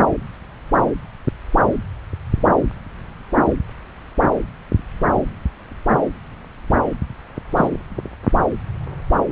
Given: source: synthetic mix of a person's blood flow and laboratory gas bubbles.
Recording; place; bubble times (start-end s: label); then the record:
Doppler ultrasound of blood flow; subclavian vein
7.55-7.68 s: bubbles
From the record:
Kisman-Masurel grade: 113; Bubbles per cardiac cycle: 1 to 2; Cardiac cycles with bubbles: 1 to 10%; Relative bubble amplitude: loud (0.450 to 0.775); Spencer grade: 1 (occasional bubble signal discernible with the cardiac motion signal, with majority of cardiac periods free of bubbles); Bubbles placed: anywhere in the cardiac cycle